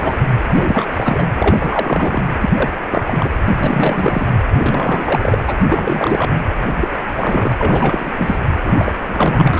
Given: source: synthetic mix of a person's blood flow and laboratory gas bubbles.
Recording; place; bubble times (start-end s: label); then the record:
Doppler ultrasound of blood flow; precordium
0.00-0.16 s: bubbles
0.47-0.86 s: bubbles
0.92-1.25 s: bubbles
1.36-2.22 s: bubbles
2.41-2.50 s: bubbles
2.54-2.71 s: bubbles
2.91-3.29 s: bubbles
3.48-4.27 s: bubbles
4.54-5.40 s: bubbles
5.46-5.56 s: bubbles
5.69-6.29 s: bubbles
6.50-6.54 s: bubbles
6.79-6.88 s: bubbles
7.12-7.53 s: bubbles
7.58-8.39 s: bubbles
8.64-8.97 s: bubbles
9.06-9.60 s: bubbles
From the record:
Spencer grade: 3 (all of the cardiac periods contain showers or single bubble signals, but not dominating or overriding the cardiac motion signals); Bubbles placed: anywhere in the cardiac cycle